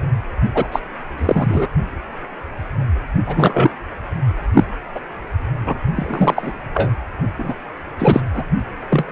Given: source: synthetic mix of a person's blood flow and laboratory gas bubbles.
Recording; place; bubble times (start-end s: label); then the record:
Doppler ultrasound of blood flow; precordium
0.54-0.67 s: bubbles
0.72-0.80 s: bubbles
1.17-1.67 s: bubbles
3.27-3.70 s: bubbles
4.53-4.64 s: bubbles
4.95-5.00 s: bubbles
5.64-5.77 s: bubbles
5.95-6.51 s: bubbles
6.74-6.91 s: bubbles
7.38-7.54 s: bubbles
7.99-8.22 s: bubbles
8.34-8.42 s: bubbles
8.90-9.04 s: bubbles
From the record:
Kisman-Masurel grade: 233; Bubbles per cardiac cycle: several, 3 to 8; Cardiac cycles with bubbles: 50 to 99%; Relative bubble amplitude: loud (0.450 to 0.775); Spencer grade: 3 (all of the cardiac periods contain showers or single bubble signals, but not dominating or overriding the cardiac motion signals); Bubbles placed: only in the low amplitude regions of the cardiac cycle